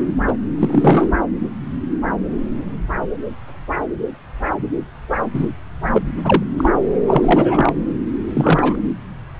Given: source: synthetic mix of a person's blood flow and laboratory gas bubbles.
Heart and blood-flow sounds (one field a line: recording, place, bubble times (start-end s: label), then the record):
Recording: Doppler ultrasound of blood flow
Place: subclavian vein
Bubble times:
0.27-0.34 s: bubbles
0.58-1.11 s: bubbles
5.33-5.50 s: bubbles
5.93-6.02 s: bubbles
6.24-6.43 s: bubbles
6.57-6.70 s: bubbles
7.07-7.72 s: bubbles
8.34-8.76 s: bubbles
From the record:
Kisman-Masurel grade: 233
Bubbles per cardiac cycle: several, 3 to 8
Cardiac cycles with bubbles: 50 to 99%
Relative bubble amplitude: loud (0.450 to 0.775)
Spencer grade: 3 (all of the cardiac periods contain showers or single bubble signals, but not dominating or overriding the cardiac motion signals)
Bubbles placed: anywhere in the cardiac cycle